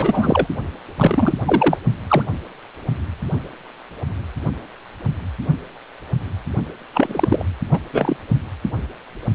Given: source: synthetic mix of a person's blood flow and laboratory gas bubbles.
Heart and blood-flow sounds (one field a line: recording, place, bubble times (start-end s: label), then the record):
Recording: Doppler ultrasound of blood flow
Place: precordium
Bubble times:
0.00-0.48 s: bubbles
0.97-1.33 s: bubbles
1.45-1.77 s: bubbles
2.08-2.23 s: bubbles
6.94-7.44 s: bubbles
7.71-7.79 s: bubbles
7.93-8.16 s: bubbles
From the record:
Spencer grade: 2 (many but less than half of the cardiac periods contain bubble signals, singularly or in groups)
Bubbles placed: anywhere in the cardiac cycle